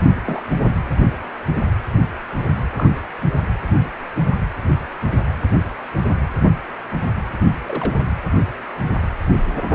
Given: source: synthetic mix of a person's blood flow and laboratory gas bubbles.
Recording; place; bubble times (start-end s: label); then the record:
Doppler ultrasound of blood flow; precordium
0.24-0.42 s: bubbles
2.74-2.90 s: bubbles
7.67-7.99 s: bubbles
From the record:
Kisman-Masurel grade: 121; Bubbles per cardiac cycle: 1 to 2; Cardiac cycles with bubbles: 10 to 50%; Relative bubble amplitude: barely perceptible (0.100 to 0.250); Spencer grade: 2 (many but less than half of the cardiac periods contain bubble signals, singularly or in groups); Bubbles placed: anywhere in the cardiac cycle